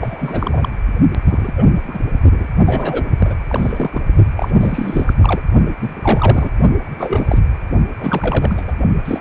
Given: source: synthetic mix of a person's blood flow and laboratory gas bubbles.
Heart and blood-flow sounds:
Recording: Doppler ultrasound of blood flow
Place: precordium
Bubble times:
0.00-0.69 s: bubbles
1.24-1.52 s: bubbles
1.56-1.65 s: bubbles
1.88-1.98 s: bubbles
2.31-2.46 s: bubbles
2.65-3.06 s: bubbles
3.19-3.35 s: bubbles
3.48-4.01 s: bubbles
4.38-4.50 s: bubbles
4.54-5.13 s: bubbles
5.21-5.42 s: bubbles
5.79-6.50 s: bubbles
6.96-7.38 s: bubbles
8.00-8.73 s: bubbles
9.04-9.19 s: bubbles
From the record:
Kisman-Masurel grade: 343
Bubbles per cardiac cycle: rolling drumbeat, 9 or more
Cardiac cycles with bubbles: 100%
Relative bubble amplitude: loud (0.450 to 0.775)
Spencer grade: 3 (all of the cardiac periods contain showers or single bubble signals, but not dominating or overriding the cardiac motion signals)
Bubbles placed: only in the low amplitude regions of the cardiac cycle

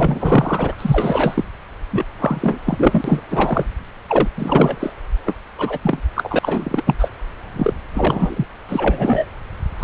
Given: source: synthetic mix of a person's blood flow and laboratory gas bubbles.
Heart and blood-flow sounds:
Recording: Doppler ultrasound of blood flow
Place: subclavian vein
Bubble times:
0.00-0.76 s: bubbles
0.78-1.44 s: bubbles
1.91-2.06 s: bubbles
2.19-2.59 s: bubbles
2.66-3.21 s: bubbles
3.30-3.66 s: bubbles
4.08-4.29 s: bubbles
4.37-4.95 s: bubbles
5.25-5.34 s: bubbles
5.58-5.79 s: bubbles
5.83-6.01 s: bubbles
6.15-6.39 s: bubbles
6.42-7.11 s: bubbles
7.56-7.73 s: bubbles
7.94-8.47 s: bubbles
8.68-9.28 s: bubbles
9.79-9.84 s: bubbles
From the record:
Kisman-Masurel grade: 333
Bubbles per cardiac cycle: rolling drumbeat, 9 or more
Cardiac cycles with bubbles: 50 to 99%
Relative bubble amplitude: loud (0.450 to 0.775)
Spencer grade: 3 (all of the cardiac periods contain showers or single bubble signals, but not dominating or overriding the cardiac motion signals)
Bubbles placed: anywhere in the cardiac cycle

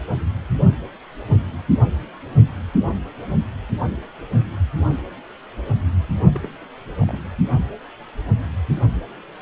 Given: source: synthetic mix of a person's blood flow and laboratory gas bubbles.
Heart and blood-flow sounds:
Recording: Doppler ultrasound of blood flow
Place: precordium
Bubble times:
6.33-6.48 s: bubbles
6.98-7.23 s: bubbles
From the record:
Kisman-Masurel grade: 211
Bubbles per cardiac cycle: several, 3 to 8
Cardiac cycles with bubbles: 1 to 10%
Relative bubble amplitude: barely perceptible (0.100 to 0.250)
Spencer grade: 1 (occasional bubble signal discernible with the cardiac motion signal, with majority of cardiac periods free of bubbles)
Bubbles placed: anywhere in the cardiac cycle

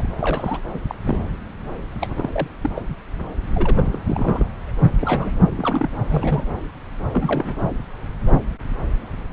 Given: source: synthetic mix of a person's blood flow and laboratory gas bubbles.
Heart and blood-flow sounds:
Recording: Doppler ultrasound of blood flow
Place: subclavian vein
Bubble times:
0.00-0.08 s: bubbles
0.17-0.60 s: bubbles
0.70-0.81 s: bubbles
0.87-0.95 s: bubbles
1.04-1.19 s: bubbles
2.00-2.48 s: bubbles
2.61-2.71 s: bubbles
2.74-2.82 s: bubbles
3.54-3.99 s: bubbles
4.06-4.46 s: bubbles
4.99-5.31 s: bubbles
5.47-5.89 s: bubbles
6.09-6.44 s: bubbles
7.12-7.58 s: bubbles
From the record:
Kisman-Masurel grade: 232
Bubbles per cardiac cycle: several, 3 to 8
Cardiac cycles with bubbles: 50 to 99%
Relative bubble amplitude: moderate (0.250 to 0.450)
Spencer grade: 3 (all of the cardiac periods contain showers or single bubble signals, but not dominating or overriding the cardiac motion signals)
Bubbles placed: anywhere in the cardiac cycle

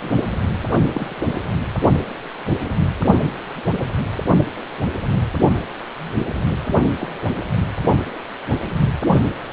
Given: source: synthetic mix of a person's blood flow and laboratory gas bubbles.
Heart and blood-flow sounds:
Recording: Doppler ultrasound of blood flow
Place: precordium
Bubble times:
0.00-0.12 s: bubbles
0.85-1.32 s: bubbles
6.82-6.86 s: bubbles
6.99-7.08 s: bubbles
From the record:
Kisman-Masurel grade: 121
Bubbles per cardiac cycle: 1 to 2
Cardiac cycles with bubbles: 10 to 50%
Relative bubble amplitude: barely perceptible (0.100 to 0.250)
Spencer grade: 2 (many but less than half of the cardiac periods contain bubble signals, singularly or in groups)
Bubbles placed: anywhere in the cardiac cycle

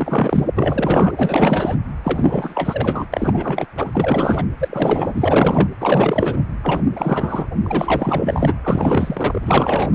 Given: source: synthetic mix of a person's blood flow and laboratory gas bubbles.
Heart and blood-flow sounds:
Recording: Doppler ultrasound of blood flow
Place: precordium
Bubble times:
0.00-0.47 s: bubbles
0.55-1.12 s: bubbles
1.17-1.76 s: bubbles
2.04-3.05 s: bubbles
3.12-3.67 s: bubbles
3.75-3.90 s: bubbles
3.93-4.46 s: bubbles
4.59-5.69 s: bubbles
5.80-6.44 s: bubbles
6.62-6.81 s: bubbles
6.95-7.46 s: bubbles
7.62-8.54 s: bubbles
8.64-9.91 s: bubbles
From the record:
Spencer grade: 4 (maximum detectable bubble signal sounding continuously throughout systole and diastole of every cardiac period, and overriding the amplitude of the normal cardiac signals)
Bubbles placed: anywhere in the cardiac cycle

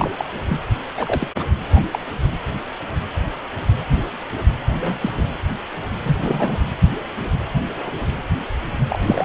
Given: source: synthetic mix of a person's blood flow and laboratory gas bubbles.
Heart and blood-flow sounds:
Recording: Doppler ultrasound of blood flow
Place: precordium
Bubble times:
0.00-0.10 s: bubbles
0.17-0.25 s: bubbles
0.48-0.62 s: bubbles
0.97-1.27 s: bubbles
1.39-1.45 s: bubbles
1.74-1.80 s: bubbles
1.91-1.99 s: bubbles
4.79-5.24 s: bubbles
6.04-6.58 s: bubbles
8.89-8.99 s: bubbles
9.02-9.25 s: bubbles
From the record:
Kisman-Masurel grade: 222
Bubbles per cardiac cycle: several, 3 to 8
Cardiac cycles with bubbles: 10 to 50%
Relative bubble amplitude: moderate (0.250 to 0.450)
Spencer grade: 2 (many but less than half of the cardiac periods contain bubble signals, singularly or in groups)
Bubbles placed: anywhere in the cardiac cycle

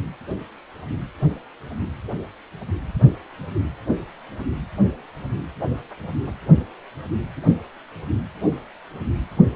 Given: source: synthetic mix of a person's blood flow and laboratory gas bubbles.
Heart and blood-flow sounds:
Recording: Doppler ultrasound of blood flow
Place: precordium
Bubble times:
no bubbles
From the record:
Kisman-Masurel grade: 000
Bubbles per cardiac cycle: 0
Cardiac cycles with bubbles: 0%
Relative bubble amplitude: no bubbles discernible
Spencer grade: 0 (complete lack of bubble signals)

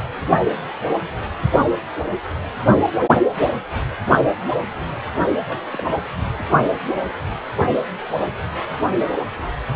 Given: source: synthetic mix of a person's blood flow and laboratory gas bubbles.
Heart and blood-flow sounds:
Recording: Doppler ultrasound of blood flow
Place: precordium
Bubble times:
5.46-5.60 s: bubbles
5.72-5.84 s: bubbles
5.88-5.95 s: bubbles
6.14-6.50 s: bubbles
From the record:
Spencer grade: 1 (occasional bubble signal discernible with the cardiac motion signal, with majority of cardiac periods free of bubbles)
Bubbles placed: only in the low amplitude regions of the cardiac cycle

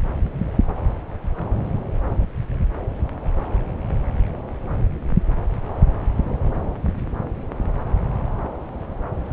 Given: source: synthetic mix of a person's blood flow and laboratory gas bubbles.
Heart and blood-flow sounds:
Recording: Doppler ultrasound of blood flow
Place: subclavian vein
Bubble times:
no bubbles
From the record:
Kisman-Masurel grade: 000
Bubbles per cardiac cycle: 0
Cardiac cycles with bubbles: 0%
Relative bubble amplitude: no bubbles discernible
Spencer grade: 0 (complete lack of bubble signals)

